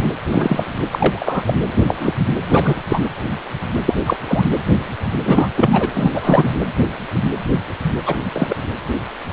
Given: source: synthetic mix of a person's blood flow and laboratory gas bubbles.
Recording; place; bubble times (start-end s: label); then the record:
Doppler ultrasound of blood flow; precordium
0.00-0.14 s: bubbles
0.30-0.65 s: bubbles
0.78-0.87 s: bubbles
0.92-1.43 s: bubbles
1.46-1.54 s: bubbles
1.67-2.13 s: bubbles
2.50-2.75 s: bubbles
2.89-3.02 s: bubbles
3.86-3.93 s: bubbles
4.06-4.17 s: bubbles
4.28-4.47 s: bubbles
5.24-5.48 s: bubbles
5.55-5.89 s: bubbles
5.94-6.50 s: bubbles
8.05-8.15 s: bubbles
8.35-8.56 s: bubbles
From the record:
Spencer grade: 3 (all of the cardiac periods contain showers or single bubble signals, but not dominating or overriding the cardiac motion signals); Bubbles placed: anywhere in the cardiac cycle